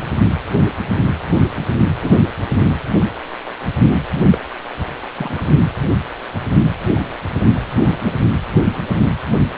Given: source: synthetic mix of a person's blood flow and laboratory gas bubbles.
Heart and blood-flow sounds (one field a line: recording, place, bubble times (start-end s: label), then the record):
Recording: Doppler ultrasound of blood flow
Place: precordium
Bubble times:
2.03-2.27 s: bubbles
4.29-4.38 s: bubbles
5.18-5.45 s: bubbles
7.81-8.16 s: bubbles
From the record:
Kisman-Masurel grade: 122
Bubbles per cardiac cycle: 1 to 2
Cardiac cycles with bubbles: 10 to 50%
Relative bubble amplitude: moderate (0.250 to 0.450)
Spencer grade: 2 (many but less than half of the cardiac periods contain bubble signals, singularly or in groups)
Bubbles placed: anywhere in the cardiac cycle